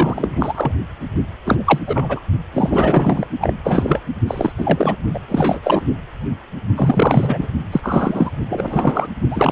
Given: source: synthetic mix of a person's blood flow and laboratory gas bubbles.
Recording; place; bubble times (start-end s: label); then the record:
Doppler ultrasound of blood flow; precordium
0.00-0.72 s: bubbles
1.45-1.79 s: bubbles
1.87-2.20 s: bubbles
2.54-3.27 s: bubbles
3.41-3.54 s: bubbles
3.64-4.01 s: bubbles
4.27-4.52 s: bubbles
4.58-4.96 s: bubbles
5.13-5.20 s: bubbles
5.28-5.82 s: bubbles
6.75-7.48 s: bubbles
7.72-8.31 s: bubbles
8.49-9.08 s: bubbles
9.30-9.52 s: bubbles
From the record:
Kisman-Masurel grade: 333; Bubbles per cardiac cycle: rolling drumbeat, 9 or more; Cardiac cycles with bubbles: 50 to 99%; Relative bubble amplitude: loud (0.450 to 0.775); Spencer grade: 3 (all of the cardiac periods contain showers or single bubble signals, but not dominating or overriding the cardiac motion signals); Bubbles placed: only in the low amplitude regions of the cardiac cycle